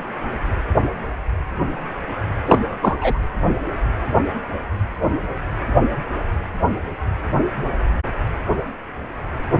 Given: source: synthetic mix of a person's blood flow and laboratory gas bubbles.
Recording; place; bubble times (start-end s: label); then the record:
Doppler ultrasound of blood flow; precordium
2.46-2.78 s: bubbles
2.81-2.97 s: bubbles
3.00-3.19 s: bubbles
From the record:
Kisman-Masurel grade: 213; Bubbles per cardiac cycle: several, 3 to 8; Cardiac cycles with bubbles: 1 to 10%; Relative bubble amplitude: loud (0.450 to 0.775); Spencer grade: 1 (occasional bubble signal discernible with the cardiac motion signal, with majority of cardiac periods free of bubbles); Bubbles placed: anywhere in the cardiac cycle